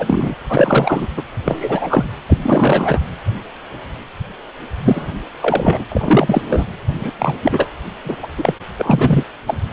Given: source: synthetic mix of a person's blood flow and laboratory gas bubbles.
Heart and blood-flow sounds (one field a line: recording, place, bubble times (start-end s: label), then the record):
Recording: Doppler ultrasound of blood flow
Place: precordium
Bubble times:
0.00-0.34 s: bubbles
0.48-1.07 s: bubbles
1.17-1.23 s: bubbles
1.44-2.05 s: bubbles
2.29-2.38 s: bubbles
2.43-3.00 s: bubbles
4.83-5.13 s: bubbles
5.40-5.85 s: bubbles
5.92-6.64 s: bubbles
6.99-7.10 s: bubbles
7.18-7.34 s: bubbles
7.42-7.69 s: bubbles
8.04-8.16 s: bubbles
8.22-8.28 s: bubbles
8.38-8.54 s: bubbles
8.78-9.23 s: bubbles
9.47-9.59 s: bubbles
From the record:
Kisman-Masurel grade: 333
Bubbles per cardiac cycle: rolling drumbeat, 9 or more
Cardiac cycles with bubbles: 50 to 99%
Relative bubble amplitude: loud (0.450 to 0.775)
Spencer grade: 3 (all of the cardiac periods contain showers or single bubble signals, but not dominating or overriding the cardiac motion signals)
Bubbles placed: anywhere in the cardiac cycle